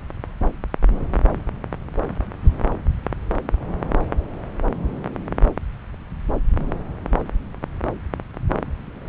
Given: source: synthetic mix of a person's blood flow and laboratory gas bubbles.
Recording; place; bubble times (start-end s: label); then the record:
Doppler ultrasound of blood flow; subclavian vein
no bubbles
From the record:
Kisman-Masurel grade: 000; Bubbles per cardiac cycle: 0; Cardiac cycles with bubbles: 0%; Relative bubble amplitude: no bubbles discernible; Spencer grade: 0 (complete lack of bubble signals)